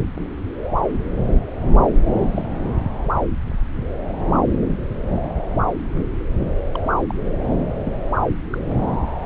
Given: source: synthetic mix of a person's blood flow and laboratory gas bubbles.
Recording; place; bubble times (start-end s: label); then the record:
Doppler ultrasound of blood flow; subclavian vein
2.23-2.46 s: bubbles
6.74-6.78 s: bubbles
7.10-7.14 s: bubbles
7.84-7.92 s: bubbles
8.50-8.58 s: bubbles
From the record:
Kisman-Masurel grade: 121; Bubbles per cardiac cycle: 1 to 2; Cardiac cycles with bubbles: 10 to 50%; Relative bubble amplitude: barely perceptible (0.100 to 0.250); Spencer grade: 2 (many but less than half of the cardiac periods contain bubble signals, singularly or in groups); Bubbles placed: anywhere in the cardiac cycle